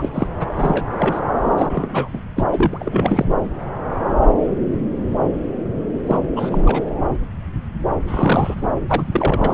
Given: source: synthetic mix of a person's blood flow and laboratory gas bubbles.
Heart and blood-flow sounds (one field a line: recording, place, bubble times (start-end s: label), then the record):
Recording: Doppler ultrasound of blood flow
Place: subclavian vein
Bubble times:
0.00-0.09 s: bubbles
0.13-0.28 s: bubbles
0.40-0.46 s: bubbles
0.56-0.87 s: bubbles
0.98-1.22 s: bubbles
1.57-1.66 s: bubbles
1.69-2.10 s: bubbles
2.13-2.21 s: bubbles
2.36-2.44 s: bubbles
2.51-3.25 s: bubbles
6.07-6.18 s: bubbles
6.35-6.85 s: bubbles
8.07-8.67 s: bubbles
8.88-9.08 s: bubbles
9.12-9.54 s: bubbles
From the record:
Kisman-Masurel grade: 332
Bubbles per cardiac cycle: rolling drumbeat, 9 or more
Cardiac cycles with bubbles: 50 to 99%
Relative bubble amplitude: moderate (0.250 to 0.450)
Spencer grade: 3 (all of the cardiac periods contain showers or single bubble signals, but not dominating or overriding the cardiac motion signals)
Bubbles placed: anywhere in the cardiac cycle